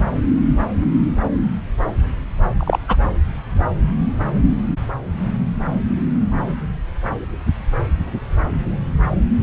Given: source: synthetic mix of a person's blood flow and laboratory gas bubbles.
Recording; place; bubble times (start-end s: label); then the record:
Doppler ultrasound of blood flow; subclavian vein
2.57-2.79 s: bubbles
2.88-2.96 s: bubbles
From the record:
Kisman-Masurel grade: 113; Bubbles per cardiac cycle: 1 to 2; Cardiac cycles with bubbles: 1 to 10%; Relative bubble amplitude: loud (0.450 to 0.775); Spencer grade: 1 (occasional bubble signal discernible with the cardiac motion signal, with majority of cardiac periods free of bubbles); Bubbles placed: anywhere in the cardiac cycle